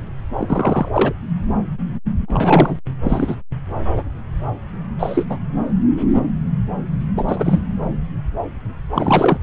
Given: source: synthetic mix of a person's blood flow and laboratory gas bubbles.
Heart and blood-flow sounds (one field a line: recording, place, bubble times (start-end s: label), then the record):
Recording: Doppler ultrasound of blood flow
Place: subclavian vein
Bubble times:
0.37-0.89 s: bubbles
0.93-1.13 s: bubbles
2.28-2.76 s: bubbles
3.03-3.36 s: bubbles
4.99-5.27 s: bubbles
5.29-5.38 s: bubbles
7.15-7.62 s: bubbles
8.94-9.38 s: bubbles
From the record:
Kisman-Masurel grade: 223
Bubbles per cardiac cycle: several, 3 to 8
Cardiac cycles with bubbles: 10 to 50%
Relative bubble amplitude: loud (0.450 to 0.775)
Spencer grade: 2 (many but less than half of the cardiac periods contain bubble signals, singularly or in groups)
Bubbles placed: anywhere in the cardiac cycle